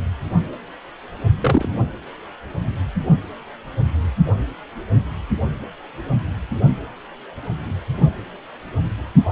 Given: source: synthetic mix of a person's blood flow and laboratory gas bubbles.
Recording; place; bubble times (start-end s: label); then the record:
Doppler ultrasound of blood flow; precordium
1.41-1.69 s: bubbles
From the record:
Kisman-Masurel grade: 113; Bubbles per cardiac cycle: 1 to 2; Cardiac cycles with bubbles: 1 to 10%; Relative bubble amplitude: loud (0.450 to 0.775); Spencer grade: 1 (occasional bubble signal discernible with the cardiac motion signal, with majority of cardiac periods free of bubbles); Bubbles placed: only in the low amplitude regions of the cardiac cycle